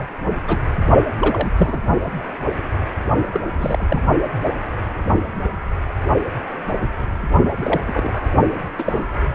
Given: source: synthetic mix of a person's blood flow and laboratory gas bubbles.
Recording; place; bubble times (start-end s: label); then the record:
Doppler ultrasound of blood flow; precordium
0.00-0.06 s: bubbles
0.31-0.35 s: bubbles
0.47-0.61 s: bubbles
1.20-1.51 s: bubbles
1.57-1.80 s: bubbles
3.31-3.40 s: bubbles
3.57-4.01 s: bubbles
7.57-7.81 s: bubbles
7.87-8.29 s: bubbles
8.79-9.06 s: bubbles
From the record:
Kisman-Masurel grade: 232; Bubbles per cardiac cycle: several, 3 to 8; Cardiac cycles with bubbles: 50 to 99%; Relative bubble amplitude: moderate (0.250 to 0.450); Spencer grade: 3 (all of the cardiac periods contain showers or single bubble signals, but not dominating or overriding the cardiac motion signals); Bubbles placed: only in the low amplitude regions of the cardiac cycle